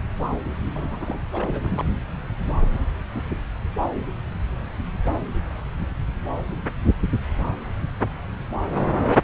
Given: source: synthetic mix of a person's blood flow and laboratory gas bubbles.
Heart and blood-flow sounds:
Doppler ultrasound of blood flow; subclavian vein
0.73-1.19 s: bubbles
1.34-1.85 s: bubbles
From the record:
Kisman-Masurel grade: 211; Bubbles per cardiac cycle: several, 3 to 8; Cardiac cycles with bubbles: 1 to 10%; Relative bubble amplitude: barely perceptible (0.100 to 0.250); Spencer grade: 1 (occasional bubble signal discernible with the cardiac motion signal, with majority of cardiac periods free of bubbles); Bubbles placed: anywhere in the cardiac cycle

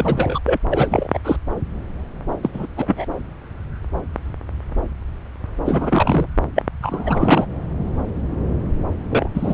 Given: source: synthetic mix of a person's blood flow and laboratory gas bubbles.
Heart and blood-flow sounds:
Doppler ultrasound of blood flow; subclavian vein
0.00-0.40 s: bubbles
0.45-0.57 s: bubbles
0.70-1.08 s: bubbles
1.13-1.20 s: bubbles
1.24-1.36 s: bubbles
2.42-2.50 s: bubbles
2.53-2.66 s: bubbles
2.76-3.05 s: bubbles
5.66-6.26 s: bubbles
6.55-6.63 s: bubbles
6.82-7.46 s: bubbles
9.11-9.28 s: bubbles
9.34-9.54 s: bubbles
From the record:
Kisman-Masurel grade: 233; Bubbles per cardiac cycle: several, 3 to 8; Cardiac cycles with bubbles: 50 to 99%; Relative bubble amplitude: loud (0.450 to 0.775); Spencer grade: 3 (all of the cardiac periods contain showers or single bubble signals, but not dominating or overriding the cardiac motion signals); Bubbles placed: anywhere in the cardiac cycle

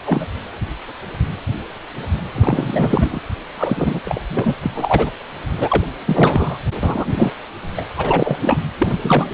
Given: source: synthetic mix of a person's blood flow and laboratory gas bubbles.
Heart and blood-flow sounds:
Doppler ultrasound of blood flow; precordium
0.06-0.26 s: bubbles
2.35-3.20 s: bubbles
3.57-4.00 s: bubbles
4.04-4.21 s: bubbles
4.29-4.54 s: bubbles
4.62-4.71 s: bubbles
4.74-5.14 s: bubbles
5.60-5.86 s: bubbles
6.06-6.58 s: bubbles
6.83-7.32 s: bubbles
7.77-7.85 s: bubbles
7.97-8.37 s: bubbles
8.41-8.57 s: bubbles
8.79-8.98 s: bubbles
9.02-9.31 s: bubbles
From the record:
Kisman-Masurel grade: 333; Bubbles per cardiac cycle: rolling drumbeat, 9 or more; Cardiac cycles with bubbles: 50 to 99%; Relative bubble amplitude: loud (0.450 to 0.775); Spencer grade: 3 (all of the cardiac periods contain showers or single bubble signals, but not dominating or overriding the cardiac motion signals); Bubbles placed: anywhere in the cardiac cycle

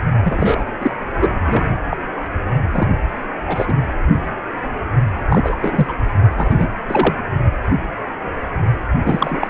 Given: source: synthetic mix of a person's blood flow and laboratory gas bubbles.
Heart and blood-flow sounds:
Doppler ultrasound of blood flow; precordium
0.23-0.64 s: bubbles
0.80-0.94 s: bubbles
1.21-1.30 s: bubbles
1.44-1.67 s: bubbles
1.91-1.97 s: bubbles
2.72-2.88 s: bubbles
3.48-3.74 s: bubbles
5.29-5.55 s: bubbles
5.61-5.93 s: bubbles
6.37-6.67 s: bubbles
6.88-7.14 s: bubbles
9.04-9.48 s: bubbles
From the record:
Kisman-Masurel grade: 233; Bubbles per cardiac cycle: several, 3 to 8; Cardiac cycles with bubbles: 50 to 99%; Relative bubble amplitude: loud (0.450 to 0.775); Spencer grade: 3 (all of the cardiac periods contain showers or single bubble signals, but not dominating or overriding the cardiac motion signals); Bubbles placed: anywhere in the cardiac cycle

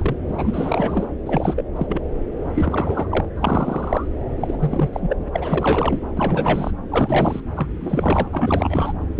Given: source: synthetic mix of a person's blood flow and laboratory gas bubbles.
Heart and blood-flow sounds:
Doppler ultrasound of blood flow; subclavian vein
0.00-0.15 s: bubbles
0.28-1.06 s: bubbles
1.26-1.63 s: bubbles
1.76-2.02 s: bubbles
2.44-2.49 s: bubbles
2.54-3.25 s: bubbles
3.36-4.08 s: bubbles
4.40-4.90 s: bubbles
4.92-5.15 s: bubbles
5.18-5.29 s: bubbles
5.33-6.00 s: bubbles
6.17-6.71 s: bubbles
6.90-7.41 s: bubbles
7.57-7.67 s: bubbles
7.80-8.28 s: bubbles
8.32-8.92 s: bubbles
9.17-9.20 s: bubbles
From the record:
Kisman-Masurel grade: 342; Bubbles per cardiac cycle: rolling drumbeat, 9 or more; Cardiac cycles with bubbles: 100%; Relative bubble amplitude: moderate (0.250 to 0.450); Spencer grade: 3 (all of the cardiac periods contain showers or single bubble signals, but not dominating or overriding the cardiac motion signals); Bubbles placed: anywhere in the cardiac cycle

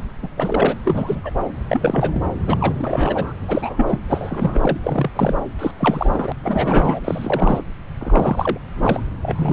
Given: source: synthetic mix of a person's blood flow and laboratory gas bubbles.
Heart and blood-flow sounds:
Doppler ultrasound of blood flow; subclavian vein
0.22-0.27 s: bubbles
0.37-0.75 s: bubbles
0.84-1.21 s: bubbles
1.24-1.31 s: bubbles
1.68-2.22 s: bubbles
2.47-2.75 s: bubbles
2.79-3.33 s: bubbles
3.48-3.99 s: bubbles
4.08-4.77 s: bubbles
4.83-5.34 s: bubbles
5.59-5.71 s: bubbles
5.79-6.32 s: bubbles
6.43-7.00 s: bubbles
7.04-7.62 s: bubbles
7.99-8.59 s: bubbles
8.76-9.01 s: bubbles
9.22-9.53 s: bubbles
From the record:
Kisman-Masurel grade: 333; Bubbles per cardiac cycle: rolling drumbeat, 9 or more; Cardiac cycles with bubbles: 50 to 99%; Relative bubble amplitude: loud (0.450 to 0.775); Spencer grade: 3 (all of the cardiac periods contain showers or single bubble signals, but not dominating or overriding the cardiac motion signals); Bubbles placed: anywhere in the cardiac cycle

